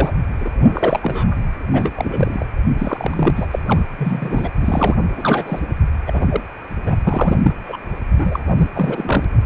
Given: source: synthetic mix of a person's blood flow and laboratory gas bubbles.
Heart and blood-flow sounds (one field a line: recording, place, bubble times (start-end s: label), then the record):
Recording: Doppler ultrasound of blood flow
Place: precordium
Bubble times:
0.00-0.11 s: bubbles
0.41-0.51 s: bubbles
0.60-1.35 s: bubbles
1.73-2.46 s: bubbles
2.77-3.31 s: bubbles
3.35-3.47 s: bubbles
3.50-3.59 s: bubbles
3.67-3.83 s: bubbles
3.98-4.50 s: bubbles
4.61-4.95 s: bubbles
5.16-5.59 s: bubbles
6.07-6.26 s: bubbles
6.29-6.41 s: bubbles
6.87-6.96 s: bubbles
7.07-7.40 s: bubbles
7.43-7.54 s: bubbles
7.65-7.77 s: bubbles
8.14-8.39 s: bubbles
8.46-8.69 s: bubbles
8.75-9.24 s: bubbles
From the record:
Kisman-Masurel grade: 243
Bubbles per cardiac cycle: several, 3 to 8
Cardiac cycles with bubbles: 100%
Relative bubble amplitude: loud (0.450 to 0.775)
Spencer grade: 3 (all of the cardiac periods contain showers or single bubble signals, but not dominating or overriding the cardiac motion signals)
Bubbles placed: anywhere in the cardiac cycle